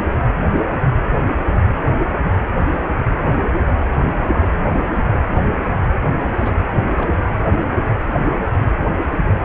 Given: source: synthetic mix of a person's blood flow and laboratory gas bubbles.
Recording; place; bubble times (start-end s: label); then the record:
Doppler ultrasound of blood flow; precordium
6.18-6.56 s: bubbles
6.72-7.19 s: bubbles
From the record:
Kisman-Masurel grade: 211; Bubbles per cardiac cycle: several, 3 to 8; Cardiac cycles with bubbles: 1 to 10%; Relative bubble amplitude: barely perceptible (0.100 to 0.250); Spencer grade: 1 (occasional bubble signal discernible with the cardiac motion signal, with majority of cardiac periods free of bubbles); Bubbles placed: anywhere in the cardiac cycle